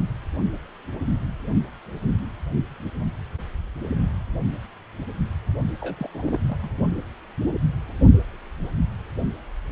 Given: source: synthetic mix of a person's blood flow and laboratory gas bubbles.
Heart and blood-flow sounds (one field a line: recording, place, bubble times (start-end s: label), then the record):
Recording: Doppler ultrasound of blood flow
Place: precordium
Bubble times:
5.80-6.08 s: bubbles
6.11-6.40 s: bubbles
6.49-6.56 s: bubbles
6.61-6.70 s: bubbles
From the record:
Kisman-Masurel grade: 211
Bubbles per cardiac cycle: several, 3 to 8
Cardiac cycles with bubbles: 1 to 10%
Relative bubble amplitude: barely perceptible (0.100 to 0.250)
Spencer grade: 1 (occasional bubble signal discernible with the cardiac motion signal, with majority of cardiac periods free of bubbles)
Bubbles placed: only in the low amplitude regions of the cardiac cycle